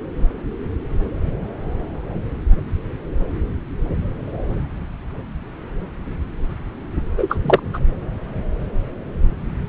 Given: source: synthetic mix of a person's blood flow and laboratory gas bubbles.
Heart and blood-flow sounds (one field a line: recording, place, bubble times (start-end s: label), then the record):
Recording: Doppler ultrasound of blood flow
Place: subclavian vein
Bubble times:
7.17-7.38 s: bubbles
7.42-7.61 s: bubbles
7.73-7.79 s: bubbles
From the record:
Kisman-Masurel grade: 213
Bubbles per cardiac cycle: several, 3 to 8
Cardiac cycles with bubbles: 1 to 10%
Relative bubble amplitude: loud (0.450 to 0.775)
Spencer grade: 1 (occasional bubble signal discernible with the cardiac motion signal, with majority of cardiac periods free of bubbles)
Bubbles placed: anywhere in the cardiac cycle